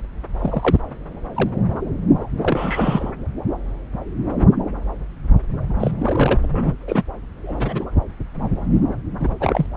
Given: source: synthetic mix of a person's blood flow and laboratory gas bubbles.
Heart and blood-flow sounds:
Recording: Doppler ultrasound of blood flow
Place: subclavian vein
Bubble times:
0.39-0.77 s: bubbles
1.34-1.49 s: bubbles
2.42-3.12 s: bubbles
5.79-5.92 s: bubbles
5.98-6.38 s: bubbles
6.42-6.76 s: bubbles
6.87-7.03 s: bubbles
7.43-7.85 s: bubbles
9.20-9.35 s: bubbles
9.40-9.66 s: bubbles
From the record:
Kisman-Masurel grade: 232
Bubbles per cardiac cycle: several, 3 to 8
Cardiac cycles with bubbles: 50 to 99%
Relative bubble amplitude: moderate (0.250 to 0.450)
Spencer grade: 3 (all of the cardiac periods contain showers or single bubble signals, but not dominating or overriding the cardiac motion signals)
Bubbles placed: anywhere in the cardiac cycle

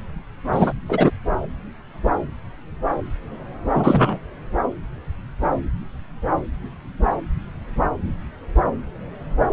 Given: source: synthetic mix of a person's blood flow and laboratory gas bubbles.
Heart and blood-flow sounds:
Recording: Doppler ultrasound of blood flow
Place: subclavian vein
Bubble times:
0.52-0.73 s: bubbles
0.89-1.10 s: bubbles
3.73-4.18 s: bubbles
From the record:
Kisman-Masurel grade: 223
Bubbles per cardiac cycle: several, 3 to 8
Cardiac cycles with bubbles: 10 to 50%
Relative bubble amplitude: loud (0.450 to 0.775)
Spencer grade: 2 (many but less than half of the cardiac periods contain bubble signals, singularly or in groups)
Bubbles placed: anywhere in the cardiac cycle

